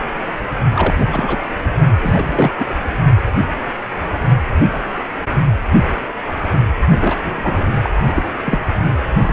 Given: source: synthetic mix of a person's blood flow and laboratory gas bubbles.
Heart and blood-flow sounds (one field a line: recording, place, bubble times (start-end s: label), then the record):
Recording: Doppler ultrasound of blood flow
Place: precordium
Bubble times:
0.72-0.94 s: bubbles
0.97-1.38 s: bubbles
2.00-2.52 s: bubbles
2.59-2.75 s: bubbles
7.01-7.67 s: bubbles
7.82-7.90 s: bubbles
8.07-8.23 s: bubbles
8.44-8.59 s: bubbles
9.12-9.33 s: bubbles
From the record:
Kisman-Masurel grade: 332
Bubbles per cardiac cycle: rolling drumbeat, 9 or more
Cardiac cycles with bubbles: 50 to 99%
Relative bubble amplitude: moderate (0.250 to 0.450)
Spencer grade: 3 (all of the cardiac periods contain showers or single bubble signals, but not dominating or overriding the cardiac motion signals)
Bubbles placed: only in the low amplitude regions of the cardiac cycle